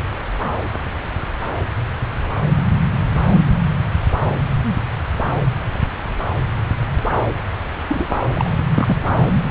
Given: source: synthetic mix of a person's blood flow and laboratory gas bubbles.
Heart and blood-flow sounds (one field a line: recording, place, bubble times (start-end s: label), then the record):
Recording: Doppler ultrasound of blood flow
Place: subclavian vein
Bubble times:
7.89-8.06 s: bubbles
8.34-8.51 s: bubbles
8.74-8.96 s: bubbles
From the record:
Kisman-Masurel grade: 212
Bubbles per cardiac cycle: several, 3 to 8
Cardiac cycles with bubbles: 1 to 10%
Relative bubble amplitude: moderate (0.250 to 0.450)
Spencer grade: 1 (occasional bubble signal discernible with the cardiac motion signal, with majority of cardiac periods free of bubbles)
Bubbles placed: anywhere in the cardiac cycle